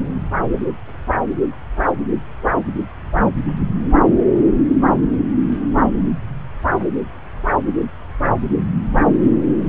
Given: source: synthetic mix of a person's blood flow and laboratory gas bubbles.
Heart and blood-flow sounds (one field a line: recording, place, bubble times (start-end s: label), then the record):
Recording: Doppler ultrasound of blood flow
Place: subclavian vein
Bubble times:
no bubbles
From the record:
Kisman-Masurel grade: 000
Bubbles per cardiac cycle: 0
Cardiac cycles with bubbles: 0%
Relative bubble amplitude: no bubbles discernible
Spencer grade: 0 (complete lack of bubble signals)